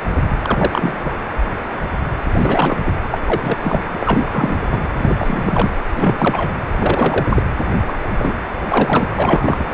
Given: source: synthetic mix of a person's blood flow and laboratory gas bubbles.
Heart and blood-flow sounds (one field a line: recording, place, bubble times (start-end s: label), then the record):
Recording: Doppler ultrasound of blood flow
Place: precordium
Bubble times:
0.42-1.17 s: bubbles
2.35-2.79 s: bubbles
2.85-2.92 s: bubbles
3.13-3.18 s: bubbles
3.25-4.29 s: bubbles
4.32-4.81 s: bubbles
4.98-5.70 s: bubbles
5.95-6.52 s: bubbles
6.76-7.42 s: bubbles
7.86-7.99 s: bubbles
8.18-8.36 s: bubbles
8.70-9.15 s: bubbles
9.19-9.71 s: bubbles
From the record:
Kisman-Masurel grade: 333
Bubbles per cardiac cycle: rolling drumbeat, 9 or more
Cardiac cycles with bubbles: 50 to 99%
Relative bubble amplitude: loud (0.450 to 0.775)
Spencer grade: 3 (all of the cardiac periods contain showers or single bubble signals, but not dominating or overriding the cardiac motion signals)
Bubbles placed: anywhere in the cardiac cycle